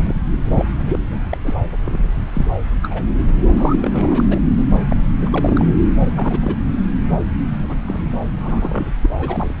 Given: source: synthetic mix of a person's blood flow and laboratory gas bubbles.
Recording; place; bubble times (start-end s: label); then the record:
Doppler ultrasound of blood flow; subclavian vein
0.00-0.14 s: bubbles
0.50-0.65 s: bubbles
0.78-0.99 s: bubbles
1.29-1.38 s: bubbles
1.46-1.54 s: bubbles
1.85-2.08 s: bubbles
2.33-2.46 s: bubbles
2.82-3.02 s: bubbles
3.56-3.79 s: bubbles
3.81-4.24 s: bubbles
4.29-4.40 s: bubbles
4.58-4.64 s: bubbles
4.90-4.96 s: bubbles
5.21-5.65 s: bubbles
6.02-6.55 s: bubbles
7.69-7.76 s: bubbles
7.87-8.02 s: bubbles
8.39-8.96 s: bubbles
9.02-9.09 s: bubbles
9.19-9.54 s: bubbles
From the record:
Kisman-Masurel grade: 242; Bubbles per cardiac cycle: several, 3 to 8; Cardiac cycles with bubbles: 100%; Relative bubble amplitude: moderate (0.250 to 0.450); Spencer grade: 3 (all of the cardiac periods contain showers or single bubble signals, but not dominating or overriding the cardiac motion signals); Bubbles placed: anywhere in the cardiac cycle